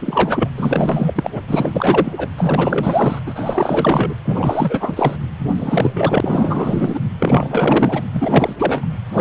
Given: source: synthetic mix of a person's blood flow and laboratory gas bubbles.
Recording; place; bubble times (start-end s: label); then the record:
Doppler ultrasound of blood flow; precordium
0.01-0.50 s: bubbles
0.57-1.42 s: bubbles
1.47-2.30 s: bubbles
2.37-3.20 s: bubbles
3.26-4.13 s: bubbles
4.25-5.17 s: bubbles
5.39-5.50 s: bubbles
5.57-7.01 s: bubbles
7.19-8.02 s: bubbles
8.12-8.54 s: bubbles
8.58-8.86 s: bubbles
9.12-9.21 s: bubbles
From the record:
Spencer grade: 4 (maximum detectable bubble signal sounding continuously throughout systole and diastole of every cardiac period, and overriding the amplitude of the normal cardiac signals); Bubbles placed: anywhere in the cardiac cycle